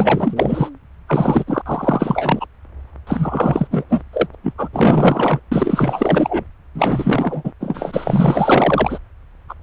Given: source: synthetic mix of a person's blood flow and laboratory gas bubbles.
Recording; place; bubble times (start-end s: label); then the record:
Doppler ultrasound of blood flow; subclavian vein
0.00-0.70 s: bubbles
1.08-1.44 s: bubbles
1.47-1.63 s: bubbles
1.66-2.46 s: bubbles
3.07-3.67 s: bubbles
3.70-3.85 s: bubbles
3.89-4.03 s: bubbles
4.12-4.27 s: bubbles
4.33-4.35 s: bubbles
4.43-4.54 s: bubbles
4.58-4.69 s: bubbles
4.73-5.40 s: bubbles
5.52-6.45 s: bubbles
6.74-7.52 s: bubbles
7.60-8.98 s: bubbles
9.48-9.54 s: bubbles
From the record:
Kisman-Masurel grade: 444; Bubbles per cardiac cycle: continuous sound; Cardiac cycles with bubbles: 100%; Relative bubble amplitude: maximal (0.775 to 0.999); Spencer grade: 4 (maximum detectable bubble signal sounding continuously throughout systole and diastole of every cardiac period, and overriding the amplitude of the normal cardiac signals); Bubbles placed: anywhere in the cardiac cycle